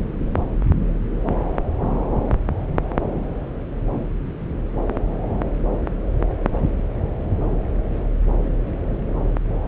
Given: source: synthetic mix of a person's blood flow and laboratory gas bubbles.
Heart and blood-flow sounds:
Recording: Doppler ultrasound of blood flow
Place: subclavian vein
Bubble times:
no bubbles
From the record:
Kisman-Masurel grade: 000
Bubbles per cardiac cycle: 0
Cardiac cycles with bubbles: 0%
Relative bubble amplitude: no bubbles discernible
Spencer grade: 0 (complete lack of bubble signals)

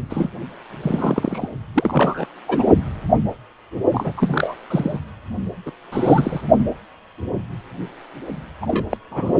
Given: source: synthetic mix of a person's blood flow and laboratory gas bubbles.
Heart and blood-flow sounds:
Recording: Doppler ultrasound of blood flow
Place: precordium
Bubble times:
0.10-0.29 s: bubbles
0.82-1.48 s: bubbles
1.74-2.25 s: bubbles
2.48-2.67 s: bubbles
3.91-4.12 s: bubbles
4.17-4.57 s: bubbles
4.70-4.99 s: bubbles
5.66-5.71 s: bubbles
5.92-6.41 s: bubbles
8.62-8.85 s: bubbles
8.89-8.97 s: bubbles
9.11-9.34 s: bubbles
9.37-9.40 s: bubbles
From the record:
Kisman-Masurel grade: 232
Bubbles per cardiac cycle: several, 3 to 8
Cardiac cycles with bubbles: 50 to 99%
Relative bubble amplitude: moderate (0.250 to 0.450)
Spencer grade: 3 (all of the cardiac periods contain showers or single bubble signals, but not dominating or overriding the cardiac motion signals)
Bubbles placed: only in the low amplitude regions of the cardiac cycle

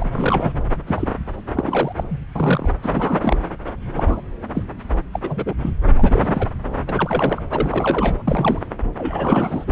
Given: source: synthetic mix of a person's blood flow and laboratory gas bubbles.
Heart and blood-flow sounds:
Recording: Doppler ultrasound of blood flow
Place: subclavian vein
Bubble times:
0.00-0.53 s: bubbles
0.86-1.07 s: bubbles
1.53-2.18 s: bubbles
2.35-2.69 s: bubbles
2.83-3.37 s: bubbles
3.94-4.21 s: bubbles
4.55-4.64 s: bubbles
5.13-5.20 s: bubbles
5.23-5.55 s: bubbles
5.62-5.70 s: bubbles
5.98-6.49 s: bubbles
6.89-7.43 s: bubbles
7.50-8.22 s: bubbles
8.27-8.61 s: bubbles
8.97-9.71 s: bubbles
From the record:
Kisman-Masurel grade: 242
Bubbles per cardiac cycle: several, 3 to 8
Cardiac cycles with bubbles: 100%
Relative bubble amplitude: moderate (0.250 to 0.450)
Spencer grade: 3 (all of the cardiac periods contain showers or single bubble signals, but not dominating or overriding the cardiac motion signals)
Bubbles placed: anywhere in the cardiac cycle

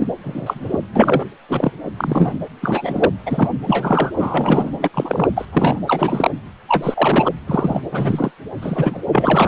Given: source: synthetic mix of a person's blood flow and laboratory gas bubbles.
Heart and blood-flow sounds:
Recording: Doppler ultrasound of blood flow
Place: precordium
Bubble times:
0.00-0.09 s: bubbles
0.23-0.79 s: bubbles
0.95-1.26 s: bubbles
1.48-1.72 s: bubbles
1.97-2.35 s: bubbles
2.61-3.09 s: bubbles
3.26-3.49 s: bubbles
3.65-4.11 s: bubbles
4.18-4.70 s: bubbles
4.79-4.89 s: bubbles
4.94-5.28 s: bubbles
5.37-5.45 s: bubbles
5.52-5.81 s: bubbles
5.87-6.31 s: bubbles
6.68-7.29 s: bubbles
7.47-7.81 s: bubbles
7.92-8.31 s: bubbles
8.61-8.98 s: bubbles
9.12-9.48 s: bubbles
From the record:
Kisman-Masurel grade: 243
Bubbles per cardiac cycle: several, 3 to 8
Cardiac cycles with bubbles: 100%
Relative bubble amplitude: loud (0.450 to 0.775)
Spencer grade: 3 (all of the cardiac periods contain showers or single bubble signals, but not dominating or overriding the cardiac motion signals)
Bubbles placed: anywhere in the cardiac cycle

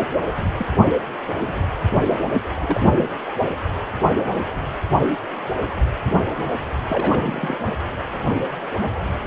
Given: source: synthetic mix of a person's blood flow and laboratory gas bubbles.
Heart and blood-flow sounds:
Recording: Doppler ultrasound of blood flow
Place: precordium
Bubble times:
0.37-0.53 s: bubbles
0.55-0.66 s: bubbles
1.47-1.56 s: bubbles
2.06-2.18 s: bubbles
2.61-3.04 s: bubbles
6.88-7.58 s: bubbles
From the record:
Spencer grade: 2 (many but less than half of the cardiac periods contain bubble signals, singularly or in groups)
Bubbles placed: anywhere in the cardiac cycle

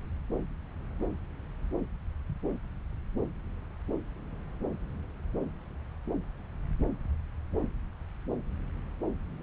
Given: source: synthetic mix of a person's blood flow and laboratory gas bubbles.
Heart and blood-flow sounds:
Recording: Doppler ultrasound of blood flow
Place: subclavian vein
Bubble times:
no bubbles
From the record:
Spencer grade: 0 (complete lack of bubble signals)

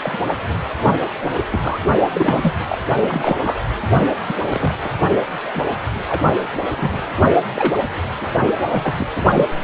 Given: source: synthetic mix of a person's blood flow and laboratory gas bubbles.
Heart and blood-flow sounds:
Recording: Doppler ultrasound of blood flow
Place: precordium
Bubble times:
0.03-0.18 s: bubbles
1.21-1.29 s: bubbles
1.52-2.52 s: bubbles
2.69-2.78 s: bubbles
3.00-3.37 s: bubbles
3.44-3.58 s: bubbles
3.94-4.02 s: bubbles
4.27-4.35 s: bubbles
4.47-4.73 s: bubbles
4.85-4.89 s: bubbles
5.12-5.18 s: bubbles
5.44-5.64 s: bubbles
6.08-6.25 s: bubbles
6.76-6.90 s: bubbles
6.92-7.00 s: bubbles
7.54-7.74 s: bubbles
8.21-8.30 s: bubbles
8.33-8.53 s: bubbles
8.68-8.95 s: bubbles
8.99-9.07 s: bubbles
9.14-9.46 s: bubbles
From the record:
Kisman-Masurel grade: 242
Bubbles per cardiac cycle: several, 3 to 8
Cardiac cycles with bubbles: 100%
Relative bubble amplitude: moderate (0.250 to 0.450)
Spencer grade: 3 (all of the cardiac periods contain showers or single bubble signals, but not dominating or overriding the cardiac motion signals)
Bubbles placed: anywhere in the cardiac cycle

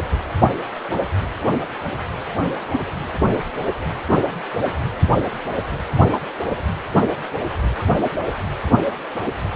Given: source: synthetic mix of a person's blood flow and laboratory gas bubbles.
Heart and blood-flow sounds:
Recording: Doppler ultrasound of blood flow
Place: precordium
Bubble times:
no bubbles
From the record:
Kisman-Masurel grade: 000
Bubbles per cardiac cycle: 0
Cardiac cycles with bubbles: 0%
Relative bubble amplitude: no bubbles discernible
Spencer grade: 0 (complete lack of bubble signals)

